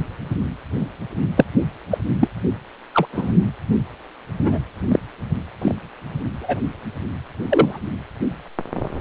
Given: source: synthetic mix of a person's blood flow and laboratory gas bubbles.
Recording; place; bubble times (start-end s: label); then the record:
Doppler ultrasound of blood flow; precordium
1.36-1.45 s: bubbles
1.91-1.98 s: bubbles
2.20-2.28 s: bubbles
2.93-3.07 s: bubbles
3.12-3.33 s: bubbles
4.39-4.58 s: bubbles
4.92-5.00 s: bubbles
5.62-5.75 s: bubbles
6.41-6.60 s: bubbles
7.49-7.77 s: bubbles
From the record:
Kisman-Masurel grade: 123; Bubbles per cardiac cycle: 1 to 2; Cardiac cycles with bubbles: 10 to 50%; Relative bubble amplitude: loud (0.450 to 0.775); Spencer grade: 2 (many but less than half of the cardiac periods contain bubble signals, singularly or in groups); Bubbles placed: anywhere in the cardiac cycle